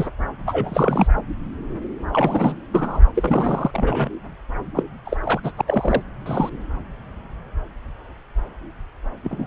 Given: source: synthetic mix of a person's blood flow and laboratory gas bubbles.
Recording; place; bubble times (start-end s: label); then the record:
Doppler ultrasound of blood flow; subclavian vein
0.00-0.08 s: bubbles
0.46-1.07 s: bubbles
2.12-2.55 s: bubbles
2.72-3.01 s: bubbles
3.16-4.09 s: bubbles
4.74-4.83 s: bubbles
5.05-5.17 s: bubbles
5.23-5.41 s: bubbles
5.43-5.51 s: bubbles
5.56-5.61 s: bubbles
5.67-6.02 s: bubbles
6.25-6.50 s: bubbles
9.23-9.47 s: bubbles
From the record:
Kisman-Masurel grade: 232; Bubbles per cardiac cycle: several, 3 to 8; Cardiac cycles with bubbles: 50 to 99%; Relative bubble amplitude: moderate (0.250 to 0.450); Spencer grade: 3 (all of the cardiac periods contain showers or single bubble signals, but not dominating or overriding the cardiac motion signals); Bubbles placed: anywhere in the cardiac cycle